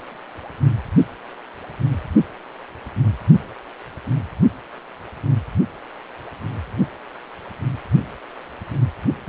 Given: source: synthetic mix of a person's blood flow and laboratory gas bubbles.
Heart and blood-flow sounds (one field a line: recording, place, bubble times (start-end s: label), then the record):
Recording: Doppler ultrasound of blood flow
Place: precordium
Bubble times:
9.26-9.29 s: bubbles
From the record:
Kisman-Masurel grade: 112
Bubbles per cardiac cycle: 1 to 2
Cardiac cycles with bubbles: 1 to 10%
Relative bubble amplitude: moderate (0.250 to 0.450)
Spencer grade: 1 (occasional bubble signal discernible with the cardiac motion signal, with majority of cardiac periods free of bubbles)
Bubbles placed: only in the low amplitude regions of the cardiac cycle